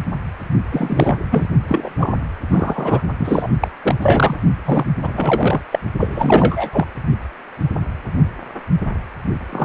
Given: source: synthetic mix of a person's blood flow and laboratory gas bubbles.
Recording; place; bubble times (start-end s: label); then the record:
Doppler ultrasound of blood flow; precordium
0.71-1.17 s: bubbles
1.31-1.48 s: bubbles
1.69-2.13 s: bubbles
2.50-3.00 s: bubbles
3.19-3.48 s: bubbles
3.60-3.68 s: bubbles
3.82-3.95 s: bubbles
4.02-4.37 s: bubbles
4.65-4.86 s: bubbles
5.02-5.61 s: bubbles
5.71-5.79 s: bubbles
6.00-6.70 s: bubbles
6.72-6.87 s: bubbles
9.50-9.65 s: bubbles
From the record:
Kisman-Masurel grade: 333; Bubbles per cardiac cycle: rolling drumbeat, 9 or more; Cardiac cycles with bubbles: 50 to 99%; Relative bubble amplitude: loud (0.450 to 0.775); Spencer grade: 3 (all of the cardiac periods contain showers or single bubble signals, but not dominating or overriding the cardiac motion signals); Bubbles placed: only in the low amplitude regions of the cardiac cycle